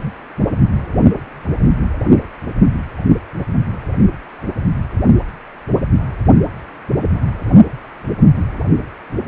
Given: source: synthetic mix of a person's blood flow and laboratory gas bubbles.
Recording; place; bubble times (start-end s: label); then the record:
Doppler ultrasound of blood flow; precordium
9.13-9.27 s: bubbles
From the record:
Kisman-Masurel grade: 121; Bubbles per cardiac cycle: 1 to 2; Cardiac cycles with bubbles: 10 to 50%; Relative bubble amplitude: barely perceptible (0.100 to 0.250); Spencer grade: 2 (many but less than half of the cardiac periods contain bubble signals, singularly or in groups); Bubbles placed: anywhere in the cardiac cycle